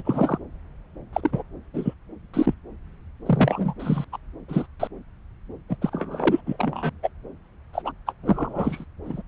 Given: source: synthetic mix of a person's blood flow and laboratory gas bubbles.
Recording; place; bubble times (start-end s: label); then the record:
Doppler ultrasound of blood flow; subclavian vein
0.00-0.02 s: bubbles
0.05-0.38 s: bubbles
1.12-1.21 s: bubbles
1.23-1.43 s: bubbles
1.73-1.94 s: bubbles
2.33-2.54 s: bubbles
3.25-3.73 s: bubbles
3.80-4.04 s: bubbles
4.12-4.17 s: bubbles
4.48-4.66 s: bubbles
4.79-4.88 s: bubbles
5.69-5.76 s: bubbles
5.81-6.41 s: bubbles
6.46-6.56 s: bubbles
6.59-6.89 s: bubbles
7.03-7.09 s: bubbles
7.73-7.82 s: bubbles
7.85-7.92 s: bubbles
8.07-8.12 s: bubbles
8.22-8.85 s: bubbles
9.05-9.21 s: bubbles
From the record:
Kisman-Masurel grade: 242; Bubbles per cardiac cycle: several, 3 to 8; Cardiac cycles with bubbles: 100%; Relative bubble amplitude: moderate (0.250 to 0.450); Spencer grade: 3 (all of the cardiac periods contain showers or single bubble signals, but not dominating or overriding the cardiac motion signals); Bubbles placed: anywhere in the cardiac cycle